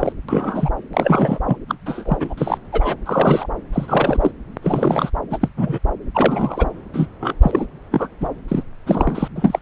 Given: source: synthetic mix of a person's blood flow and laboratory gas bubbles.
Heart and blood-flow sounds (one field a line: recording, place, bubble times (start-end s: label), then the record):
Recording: Doppler ultrasound of blood flow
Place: subclavian vein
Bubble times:
0.00-0.12 s: bubbles
0.29-0.70 s: bubbles
0.93-1.39 s: bubbles
1.46-1.58 s: bubbles
1.68-1.75 s: bubbles
1.85-2.17 s: bubbles
2.20-2.33 s: bubbles
2.37-2.58 s: bubbles
2.72-2.96 s: bubbles
3.06-3.47 s: bubbles
3.73-4.32 s: bubbles
4.62-5.11 s: bubbles
5.30-5.38 s: bubbles
5.41-5.49 s: bubbles
5.57-5.79 s: bubbles
6.15-6.70 s: bubbles
6.93-7.07 s: bubbles
7.20-7.34 s: bubbles
7.42-7.66 s: bubbles
7.91-8.08 s: bubbles
8.21-8.28 s: bubbles
8.48-8.63 s: bubbles
8.87-9.28 s: bubbles
9.36-9.62 s: bubbles
From the record:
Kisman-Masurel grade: 243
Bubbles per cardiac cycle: several, 3 to 8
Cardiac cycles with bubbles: 100%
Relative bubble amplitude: loud (0.450 to 0.775)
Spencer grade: 3 (all of the cardiac periods contain showers or single bubble signals, but not dominating or overriding the cardiac motion signals)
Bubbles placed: anywhere in the cardiac cycle